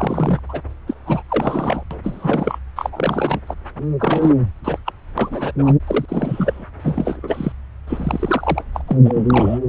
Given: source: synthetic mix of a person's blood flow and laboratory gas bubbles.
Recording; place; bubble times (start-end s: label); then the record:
Doppler ultrasound of blood flow; subclavian vein
0.00-0.40 s: bubbles
0.48-0.60 s: bubbles
0.87-0.94 s: bubbles
1.06-1.23 s: bubbles
1.29-1.83 s: bubbles
1.90-1.99 s: bubbles
2.03-2.58 s: bubbles
2.76-2.90 s: bubbles
2.92-3.40 s: bubbles
3.46-3.54 s: bubbles
3.99-4.35 s: bubbles
4.64-4.78 s: bubbles
4.86-4.92 s: bubbles
5.18-5.52 s: bubbles
5.58-5.75 s: bubbles
5.87-6.06 s: bubbles
6.08-6.67 s: bubbles
6.82-7.53 s: bubbles
7.88-8.63 s: bubbles
8.74-8.81 s: bubbles
8.87-8.97 s: bubbles
9.04-9.59 s: bubbles
From the record:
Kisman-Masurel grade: 332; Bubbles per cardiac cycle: rolling drumbeat, 9 or more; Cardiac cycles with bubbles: 50 to 99%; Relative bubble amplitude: moderate (0.250 to 0.450); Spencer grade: 3 (all of the cardiac periods contain showers or single bubble signals, but not dominating or overriding the cardiac motion signals); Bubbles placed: anywhere in the cardiac cycle